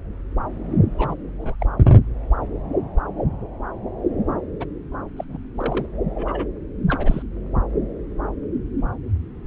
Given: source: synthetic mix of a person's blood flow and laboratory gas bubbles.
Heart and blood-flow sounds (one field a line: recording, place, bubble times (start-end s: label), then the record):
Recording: Doppler ultrasound of blood flow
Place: subclavian vein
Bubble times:
0.97-1.15 s: bubbles
1.26-1.34 s: bubbles
1.38-1.56 s: bubbles
1.60-1.67 s: bubbles
4.59-4.65 s: bubbles
5.17-5.25 s: bubbles
5.29-5.38 s: bubbles
5.57-5.86 s: bubbles
6.12-6.48 s: bubbles
6.88-7.23 s: bubbles
From the record:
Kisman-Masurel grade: 221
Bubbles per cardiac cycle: several, 3 to 8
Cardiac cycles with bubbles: 10 to 50%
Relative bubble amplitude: barely perceptible (0.100 to 0.250)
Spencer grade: 2 (many but less than half of the cardiac periods contain bubble signals, singularly or in groups)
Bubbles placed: anywhere in the cardiac cycle